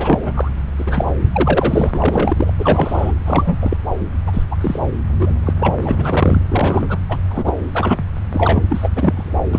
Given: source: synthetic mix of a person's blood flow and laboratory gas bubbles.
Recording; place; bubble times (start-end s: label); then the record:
Doppler ultrasound of blood flow; subclavian vein
0.00-0.51 s: bubbles
0.78-1.04 s: bubbles
1.32-1.91 s: bubbles
1.94-2.54 s: bubbles
2.58-3.12 s: bubbles
3.25-3.59 s: bubbles
3.61-3.77 s: bubbles
4.27-4.43 s: bubbles
4.51-4.56 s: bubbles
4.61-4.80 s: bubbles
5.20-5.39 s: bubbles
5.46-5.54 s: bubbles
5.60-5.75 s: bubbles
5.82-5.96 s: bubbles
5.98-6.42 s: bubbles
6.50-6.99 s: bubbles
7.09-7.17 s: bubbles
7.29-7.52 s: bubbles
7.75-8.03 s: bubbles
8.32-8.63 s: bubbles
8.69-8.89 s: bubbles
8.95-9.33 s: bubbles
9.52-9.59 s: bubbles
From the record:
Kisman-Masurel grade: 242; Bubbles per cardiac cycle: several, 3 to 8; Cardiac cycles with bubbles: 100%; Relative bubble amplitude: moderate (0.250 to 0.450); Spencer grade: 3 (all of the cardiac periods contain showers or single bubble signals, but not dominating or overriding the cardiac motion signals); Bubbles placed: anywhere in the cardiac cycle